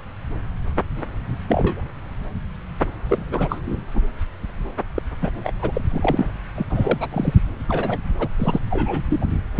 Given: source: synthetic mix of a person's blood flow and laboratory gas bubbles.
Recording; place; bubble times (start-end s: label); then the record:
Doppler ultrasound of blood flow; subclavian vein
1.48-1.82 s: bubbles
3.09-3.25 s: bubbles
3.31-3.62 s: bubbles
3.66-3.86 s: bubbles
3.94-4.01 s: bubbles
4.95-5.02 s: bubbles
5.21-5.31 s: bubbles
5.44-5.53 s: bubbles
5.62-5.81 s: bubbles
5.90-6.30 s: bubbles
6.54-6.65 s: bubbles
6.70-7.36 s: bubbles
7.68-7.98 s: bubbles
8.19-8.28 s: bubbles
8.38-8.59 s: bubbles
8.70-9.04 s: bubbles
9.10-9.26 s: bubbles
From the record:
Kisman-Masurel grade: 232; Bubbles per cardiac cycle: several, 3 to 8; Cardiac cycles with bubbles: 50 to 99%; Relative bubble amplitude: moderate (0.250 to 0.450); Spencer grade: 3 (all of the cardiac periods contain showers or single bubble signals, but not dominating or overriding the cardiac motion signals); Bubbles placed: anywhere in the cardiac cycle